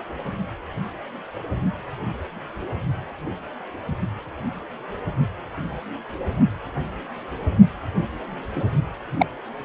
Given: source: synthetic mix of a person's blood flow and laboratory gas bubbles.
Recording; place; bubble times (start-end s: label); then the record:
Doppler ultrasound of blood flow; precordium
8.55-8.62 s: bubbles
9.19-9.27 s: bubbles
From the record:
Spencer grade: 2 (many but less than half of the cardiac periods contain bubble signals, singularly or in groups); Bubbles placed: anywhere in the cardiac cycle